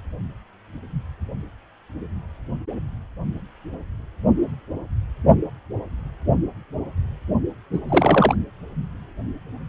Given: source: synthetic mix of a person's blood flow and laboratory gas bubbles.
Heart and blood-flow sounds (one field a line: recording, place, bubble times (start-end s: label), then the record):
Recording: Doppler ultrasound of blood flow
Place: precordium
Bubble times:
7.72-7.79 s: bubbles
7.88-8.35 s: bubbles
From the record:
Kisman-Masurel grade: 212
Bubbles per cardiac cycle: several, 3 to 8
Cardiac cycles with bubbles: 1 to 10%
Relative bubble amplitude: moderate (0.250 to 0.450)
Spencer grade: 1 (occasional bubble signal discernible with the cardiac motion signal, with majority of cardiac periods free of bubbles)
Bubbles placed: only in the low amplitude regions of the cardiac cycle